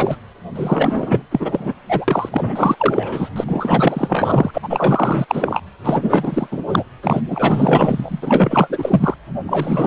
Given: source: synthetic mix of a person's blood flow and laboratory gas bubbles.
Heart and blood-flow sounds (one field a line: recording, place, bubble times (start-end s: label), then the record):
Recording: Doppler ultrasound of blood flow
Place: precordium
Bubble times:
0.00-0.17 s: bubbles
0.55-1.24 s: bubbles
1.31-1.74 s: bubbles
1.89-2.05 s: bubbles
2.08-3.30 s: bubbles
3.35-3.44 s: bubbles
3.48-4.51 s: bubbles
4.54-4.59 s: bubbles
4.62-5.26 s: bubbles
5.28-5.61 s: bubbles
5.84-6.47 s: bubbles
6.51-6.62 s: bubbles
6.69-6.84 s: bubbles
7.02-7.21 s: bubbles
7.30-9.14 s: bubbles
9.46-9.87 s: bubbles
From the record:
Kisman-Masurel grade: 444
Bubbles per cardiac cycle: continuous sound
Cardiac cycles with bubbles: 100%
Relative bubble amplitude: maximal (0.775 to 0.999)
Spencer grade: 4 (maximum detectable bubble signal sounding continuously throughout systole and diastole of every cardiac period, and overriding the amplitude of the normal cardiac signals)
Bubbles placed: anywhere in the cardiac cycle